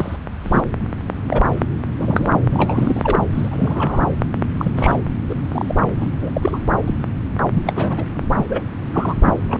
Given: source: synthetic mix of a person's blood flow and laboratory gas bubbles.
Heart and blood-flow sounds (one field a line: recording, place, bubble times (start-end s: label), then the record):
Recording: Doppler ultrasound of blood flow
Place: subclavian vein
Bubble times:
0.00-0.17 s: bubbles
0.44-0.60 s: bubbles
1.29-1.45 s: bubbles
1.70-1.72 s: bubbles
1.99-2.40 s: bubbles
2.51-3.19 s: bubbles
3.32-4.15 s: bubbles
4.58-4.72 s: bubbles
4.77-4.97 s: bubbles
5.29-5.35 s: bubbles
5.51-5.86 s: bubbles
6.00-6.06 s: bubbles
6.21-6.31 s: bubbles
6.33-6.59 s: bubbles
6.87-6.94 s: bubbles
7.54-7.63 s: bubbles
7.66-8.04 s: bubbles
8.37-8.46 s: bubbles
8.48-8.64 s: bubbles
8.92-9.16 s: bubbles
9.24-9.34 s: bubbles
9.47-9.60 s: bubbles
From the record:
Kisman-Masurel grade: 232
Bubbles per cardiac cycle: several, 3 to 8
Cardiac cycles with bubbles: 50 to 99%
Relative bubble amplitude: moderate (0.250 to 0.450)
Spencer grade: 3 (all of the cardiac periods contain showers or single bubble signals, but not dominating or overriding the cardiac motion signals)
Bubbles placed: anywhere in the cardiac cycle